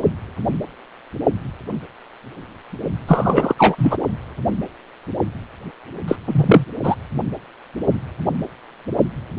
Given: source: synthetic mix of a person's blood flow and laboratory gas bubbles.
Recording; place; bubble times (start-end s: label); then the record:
Doppler ultrasound of blood flow; precordium
3.07-3.54 s: bubbles
3.58-3.97 s: bubbles
6.08-6.16 s: bubbles
6.27-6.65 s: bubbles
6.83-6.95 s: bubbles
From the record:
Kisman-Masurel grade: 223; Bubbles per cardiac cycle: several, 3 to 8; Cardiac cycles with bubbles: 10 to 50%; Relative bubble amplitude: loud (0.450 to 0.775); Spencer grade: 2 (many but less than half of the cardiac periods contain bubble signals, singularly or in groups); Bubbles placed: only in the low amplitude regions of the cardiac cycle